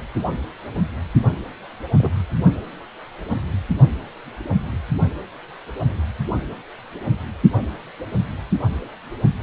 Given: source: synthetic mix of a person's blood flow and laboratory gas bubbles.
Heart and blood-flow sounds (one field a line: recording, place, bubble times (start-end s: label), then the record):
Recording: Doppler ultrasound of blood flow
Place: precordium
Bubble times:
1.98-2.13 s: bubbles
From the record:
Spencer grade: 1 (occasional bubble signal discernible with the cardiac motion signal, with majority of cardiac periods free of bubbles)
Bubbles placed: only in the low amplitude regions of the cardiac cycle